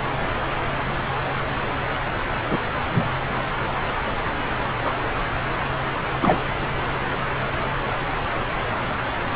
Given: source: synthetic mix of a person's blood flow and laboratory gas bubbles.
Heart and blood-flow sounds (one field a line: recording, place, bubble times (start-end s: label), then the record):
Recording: Doppler ultrasound of blood flow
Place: subclavian vein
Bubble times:
2.48-2.58 s: bubbles
2.94-3.08 s: bubbles
4.84-4.94 s: bubbles
6.21-6.38 s: bubbles
From the record:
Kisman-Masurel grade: 123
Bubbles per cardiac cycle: 1 to 2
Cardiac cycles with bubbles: 10 to 50%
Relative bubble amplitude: loud (0.450 to 0.775)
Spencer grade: 2 (many but less than half of the cardiac periods contain bubble signals, singularly or in groups)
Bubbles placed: anywhere in the cardiac cycle